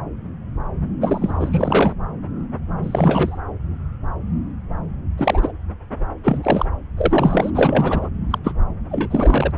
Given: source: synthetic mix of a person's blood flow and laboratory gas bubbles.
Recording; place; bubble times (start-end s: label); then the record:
Doppler ultrasound of blood flow; subclavian vein
1.01-1.93 s: bubbles
2.83-3.41 s: bubbles
5.17-5.52 s: bubbles
6.23-6.65 s: bubbles
6.97-7.50 s: bubbles
7.54-8.09 s: bubbles
8.30-8.38 s: bubbles
8.44-8.53 s: bubbles
8.89-9.52 s: bubbles
From the record:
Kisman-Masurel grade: 233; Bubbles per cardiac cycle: several, 3 to 8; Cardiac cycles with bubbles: 50 to 99%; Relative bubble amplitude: loud (0.450 to 0.775); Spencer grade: 3 (all of the cardiac periods contain showers or single bubble signals, but not dominating or overriding the cardiac motion signals); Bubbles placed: anywhere in the cardiac cycle